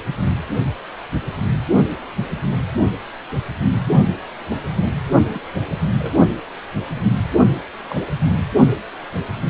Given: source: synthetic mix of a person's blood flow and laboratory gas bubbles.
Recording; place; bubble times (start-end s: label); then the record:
Doppler ultrasound of blood flow; precordium
5.28-5.42 s: bubbles
5.71-5.90 s: bubbles
5.99-6.15 s: bubbles
7.79-8.12 s: bubbles
From the record:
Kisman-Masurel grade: 121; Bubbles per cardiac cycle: 1 to 2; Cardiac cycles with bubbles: 10 to 50%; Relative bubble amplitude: barely perceptible (0.100 to 0.250); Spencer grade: 2 (many but less than half of the cardiac periods contain bubble signals, singularly or in groups); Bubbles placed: anywhere in the cardiac cycle